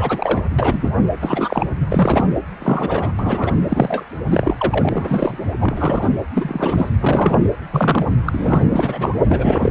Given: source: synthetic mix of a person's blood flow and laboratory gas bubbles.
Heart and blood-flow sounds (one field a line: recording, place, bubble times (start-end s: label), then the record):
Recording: Doppler ultrasound of blood flow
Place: precordium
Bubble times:
0.00-0.41 s: bubbles
0.58-0.90 s: bubbles
1.20-1.67 s: bubbles
1.89-2.29 s: bubbles
2.60-3.12 s: bubbles
3.19-3.56 s: bubbles
3.65-4.05 s: bubbles
4.29-5.39 s: bubbles
5.60-6.09 s: bubbles
6.34-6.90 s: bubbles
6.99-7.38 s: bubbles
7.72-8.13 s: bubbles
8.25-8.69 s: bubbles
8.71-9.21 s: bubbles
9.29-9.71 s: bubbles
From the record:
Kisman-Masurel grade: 233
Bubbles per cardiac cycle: several, 3 to 8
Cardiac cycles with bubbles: 50 to 99%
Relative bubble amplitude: loud (0.450 to 0.775)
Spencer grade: 3 (all of the cardiac periods contain showers or single bubble signals, but not dominating or overriding the cardiac motion signals)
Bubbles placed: anywhere in the cardiac cycle